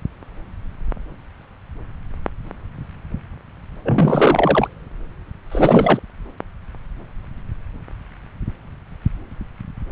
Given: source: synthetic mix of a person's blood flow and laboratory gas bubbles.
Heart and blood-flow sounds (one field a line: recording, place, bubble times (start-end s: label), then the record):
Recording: Doppler ultrasound of blood flow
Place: subclavian vein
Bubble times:
3.85-4.68 s: bubbles
5.52-6.00 s: bubbles
From the record:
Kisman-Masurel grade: 213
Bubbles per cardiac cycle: several, 3 to 8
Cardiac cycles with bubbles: 1 to 10%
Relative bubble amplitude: loud (0.450 to 0.775)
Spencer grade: 1 (occasional bubble signal discernible with the cardiac motion signal, with majority of cardiac periods free of bubbles)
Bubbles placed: anywhere in the cardiac cycle